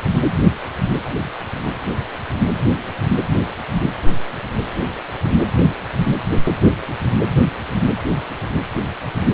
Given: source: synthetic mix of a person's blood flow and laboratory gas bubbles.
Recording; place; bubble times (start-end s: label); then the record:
Doppler ultrasound of blood flow; precordium
no bubbles
From the record:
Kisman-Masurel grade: 000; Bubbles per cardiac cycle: 0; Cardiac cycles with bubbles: 0%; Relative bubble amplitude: no bubbles discernible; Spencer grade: 0 (complete lack of bubble signals)